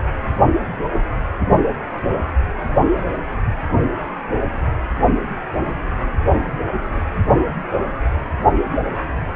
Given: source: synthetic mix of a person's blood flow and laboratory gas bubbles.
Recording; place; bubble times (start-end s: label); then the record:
Doppler ultrasound of blood flow; precordium
0.93-0.99 s: bubbles
3.12-3.17 s: bubbles
From the record:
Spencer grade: 2 (many but less than half of the cardiac periods contain bubble signals, singularly or in groups); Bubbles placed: only in the low amplitude regions of the cardiac cycle